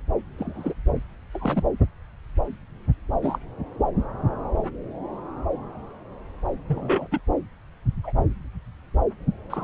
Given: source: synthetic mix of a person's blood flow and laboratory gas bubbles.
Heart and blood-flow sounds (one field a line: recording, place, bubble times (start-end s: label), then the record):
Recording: Doppler ultrasound of blood flow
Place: subclavian vein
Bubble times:
0.38-0.74 s: bubbles
1.33-1.64 s: bubbles
3.21-3.38 s: bubbles
6.68-7.08 s: bubbles
7.11-7.21 s: bubbles
8.03-8.12 s: bubbles
9.50-9.64 s: bubbles
From the record:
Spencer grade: 2 (many but less than half of the cardiac periods contain bubble signals, singularly or in groups)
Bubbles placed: anywhere in the cardiac cycle